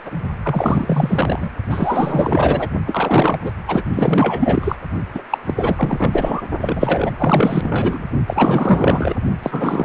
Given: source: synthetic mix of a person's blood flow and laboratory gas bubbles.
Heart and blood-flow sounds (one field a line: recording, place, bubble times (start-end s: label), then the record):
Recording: Doppler ultrasound of blood flow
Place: precordium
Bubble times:
0.04-0.11 s: bubbles
0.43-1.50 s: bubbles
1.69-2.69 s: bubbles
2.87-3.39 s: bubbles
3.44-3.52 s: bubbles
3.67-3.83 s: bubbles
3.93-4.76 s: bubbles
5.14-5.22 s: bubbles
5.30-5.38 s: bubbles
5.46-6.42 s: bubbles
6.61-7.12 s: bubbles
7.17-8.11 s: bubbles
8.26-9.15 s: bubbles
9.42-9.84 s: bubbles
From the record:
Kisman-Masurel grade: 444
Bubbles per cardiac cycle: continuous sound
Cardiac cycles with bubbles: 100%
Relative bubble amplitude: maximal (0.775 to 0.999)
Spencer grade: 4 (maximum detectable bubble signal sounding continuously throughout systole and diastole of every cardiac period, and overriding the amplitude of the normal cardiac signals)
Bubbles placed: only in the low amplitude regions of the cardiac cycle